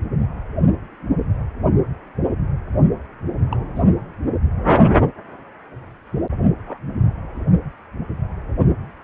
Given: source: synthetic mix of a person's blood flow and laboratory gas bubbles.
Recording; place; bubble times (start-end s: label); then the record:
Doppler ultrasound of blood flow; precordium
3.51-3.57 s: bubbles
3.75-3.83 s: bubbles
6.65-6.79 s: bubbles
From the record:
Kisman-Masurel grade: 121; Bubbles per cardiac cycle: 1 to 2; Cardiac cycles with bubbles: 10 to 50%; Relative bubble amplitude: barely perceptible (0.100 to 0.250); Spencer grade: 2 (many but less than half of the cardiac periods contain bubble signals, singularly or in groups); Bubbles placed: only in the low amplitude regions of the cardiac cycle